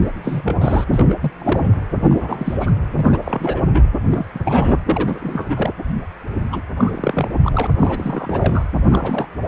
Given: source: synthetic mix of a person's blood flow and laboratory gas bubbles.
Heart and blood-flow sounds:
Doppler ultrasound of blood flow; precordium
0.00-0.11 s: bubbles
0.23-0.84 s: bubbles
0.94-1.31 s: bubbles
1.39-1.76 s: bubbles
1.99-2.71 s: bubbles
2.95-3.18 s: bubbles
3.24-3.62 s: bubbles
3.72-3.89 s: bubbles
4.08-4.25 s: bubbles
4.34-4.39 s: bubbles
4.45-4.79 s: bubbles
4.84-5.71 s: bubbles
6.50-6.62 s: bubbles
6.76-7.29 s: bubbles
7.43-7.67 s: bubbles
7.79-8.64 s: bubbles
8.87-9.27 s: bubbles
9.43-9.48 s: bubbles
From the record:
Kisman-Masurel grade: 342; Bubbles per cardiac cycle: rolling drumbeat, 9 or more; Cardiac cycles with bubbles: 100%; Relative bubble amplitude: moderate (0.250 to 0.450); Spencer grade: 3 (all of the cardiac periods contain showers or single bubble signals, but not dominating or overriding the cardiac motion signals); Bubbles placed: anywhere in the cardiac cycle

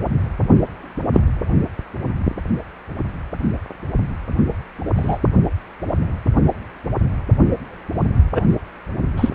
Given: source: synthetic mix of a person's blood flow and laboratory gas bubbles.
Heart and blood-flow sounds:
Doppler ultrasound of blood flow; precordium
1.13-1.20 s: bubbles
4.96-5.18 s: bubbles
8.34-8.44 s: bubbles
9.16-9.30 s: bubbles
From the record:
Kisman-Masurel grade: 123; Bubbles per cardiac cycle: 1 to 2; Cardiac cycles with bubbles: 10 to 50%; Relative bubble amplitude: loud (0.450 to 0.775); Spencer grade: 2 (many but less than half of the cardiac periods contain bubble signals, singularly or in groups); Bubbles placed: anywhere in the cardiac cycle

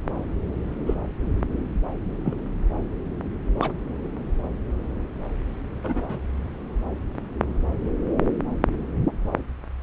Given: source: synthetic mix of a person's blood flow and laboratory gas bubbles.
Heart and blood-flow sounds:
Doppler ultrasound of blood flow; subclavian vein
0.85-0.95 s: bubbles
2.24-2.36 s: bubbles
3.60-3.72 s: bubbles
5.83-6.20 s: bubbles
From the record:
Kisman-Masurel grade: 123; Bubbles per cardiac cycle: 1 to 2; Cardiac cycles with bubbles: 10 to 50%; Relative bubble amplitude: loud (0.450 to 0.775); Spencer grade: 2 (many but less than half of the cardiac periods contain bubble signals, singularly or in groups); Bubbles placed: anywhere in the cardiac cycle

